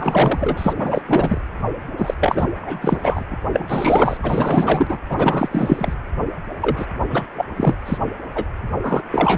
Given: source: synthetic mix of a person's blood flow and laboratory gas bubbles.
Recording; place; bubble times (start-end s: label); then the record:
Doppler ultrasound of blood flow; precordium
0.00-0.73 s: bubbles
0.76-1.04 s: bubbles
1.07-1.41 s: bubbles
1.97-2.14 s: bubbles
2.20-2.49 s: bubbles
2.61-3.24 s: bubbles
3.30-3.37 s: bubbles
3.45-4.17 s: bubbles
4.22-4.98 s: bubbles
5.09-5.94 s: bubbles
6.60-6.86 s: bubbles
7.10-7.26 s: bubbles
7.35-7.45 s: bubbles
7.57-7.75 s: bubbles
7.86-7.98 s: bubbles
8.33-8.46 s: bubbles
8.82-9.03 s: bubbles
9.12-9.38 s: bubbles
From the record:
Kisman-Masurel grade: 444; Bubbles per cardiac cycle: continuous sound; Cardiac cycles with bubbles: 100%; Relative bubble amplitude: maximal (0.775 to 0.999); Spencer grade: 4 (maximum detectable bubble signal sounding continuously throughout systole and diastole of every cardiac period, and overriding the amplitude of the normal cardiac signals); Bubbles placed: anywhere in the cardiac cycle